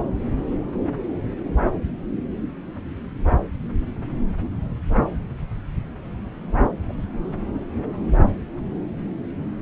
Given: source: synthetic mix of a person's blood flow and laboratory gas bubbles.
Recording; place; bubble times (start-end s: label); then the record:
Doppler ultrasound of blood flow; subclavian vein
6.88-6.93 s: bubbles
From the record:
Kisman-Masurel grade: 111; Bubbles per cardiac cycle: 1 to 2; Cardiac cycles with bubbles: 1 to 10%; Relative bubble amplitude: barely perceptible (0.100 to 0.250); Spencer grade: 1 (occasional bubble signal discernible with the cardiac motion signal, with majority of cardiac periods free of bubbles); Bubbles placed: anywhere in the cardiac cycle